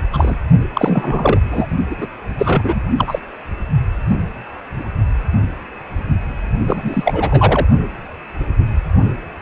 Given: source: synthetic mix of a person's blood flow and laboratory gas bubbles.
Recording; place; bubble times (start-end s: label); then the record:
Doppler ultrasound of blood flow; precordium
0.13-0.38 s: bubbles
0.74-1.40 s: bubbles
1.50-1.67 s: bubbles
1.90-2.08 s: bubbles
2.38-2.81 s: bubbles
2.98-3.19 s: bubbles
6.67-7.66 s: bubbles
From the record:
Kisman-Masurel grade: 333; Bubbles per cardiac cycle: rolling drumbeat, 9 or more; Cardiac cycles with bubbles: 50 to 99%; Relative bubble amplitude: loud (0.450 to 0.775); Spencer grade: 3 (all of the cardiac periods contain showers or single bubble signals, but not dominating or overriding the cardiac motion signals); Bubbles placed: only in the low amplitude regions of the cardiac cycle